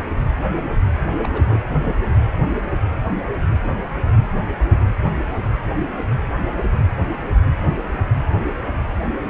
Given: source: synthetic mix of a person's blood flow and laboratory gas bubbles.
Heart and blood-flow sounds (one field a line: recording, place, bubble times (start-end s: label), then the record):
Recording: Doppler ultrasound of blood flow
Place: precordium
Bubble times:
1.23-1.64 s: bubbles
1.69-1.95 s: bubbles
From the record:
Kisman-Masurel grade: 211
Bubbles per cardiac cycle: several, 3 to 8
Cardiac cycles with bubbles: 1 to 10%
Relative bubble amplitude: barely perceptible (0.100 to 0.250)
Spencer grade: 1 (occasional bubble signal discernible with the cardiac motion signal, with majority of cardiac periods free of bubbles)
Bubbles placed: anywhere in the cardiac cycle